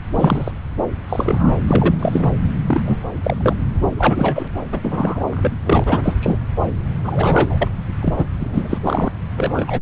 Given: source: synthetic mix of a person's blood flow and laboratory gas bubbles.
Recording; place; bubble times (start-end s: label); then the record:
Doppler ultrasound of blood flow; subclavian vein
0.15-0.52 s: bubbles
1.09-1.51 s: bubbles
1.67-1.95 s: bubbles
1.99-2.27 s: bubbles
2.67-3.00 s: bubbles
3.23-3.36 s: bubbles
3.40-3.58 s: bubbles
3.95-4.48 s: bubbles
4.72-5.22 s: bubbles
5.31-5.58 s: bubbles
5.65-6.17 s: bubbles
6.21-6.38 s: bubbles
7.04-7.70 s: bubbles
8.01-8.26 s: bubbles
8.39-8.78 s: bubbles
8.84-9.12 s: bubbles
9.37-9.80 s: bubbles
From the record:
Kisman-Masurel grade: 243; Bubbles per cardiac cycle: several, 3 to 8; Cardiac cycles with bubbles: 100%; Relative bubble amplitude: loud (0.450 to 0.775); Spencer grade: 3 (all of the cardiac periods contain showers or single bubble signals, but not dominating or overriding the cardiac motion signals); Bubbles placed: anywhere in the cardiac cycle